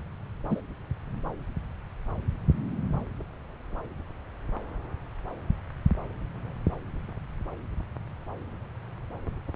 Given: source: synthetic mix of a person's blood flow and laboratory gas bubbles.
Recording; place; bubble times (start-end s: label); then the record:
Doppler ultrasound of blood flow; subclavian vein
0.50-0.60 s: bubbles
From the record:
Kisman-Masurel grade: 112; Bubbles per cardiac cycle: 1 to 2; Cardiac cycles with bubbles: 1 to 10%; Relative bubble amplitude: moderate (0.250 to 0.450); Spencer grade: 1 (occasional bubble signal discernible with the cardiac motion signal, with majority of cardiac periods free of bubbles); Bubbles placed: anywhere in the cardiac cycle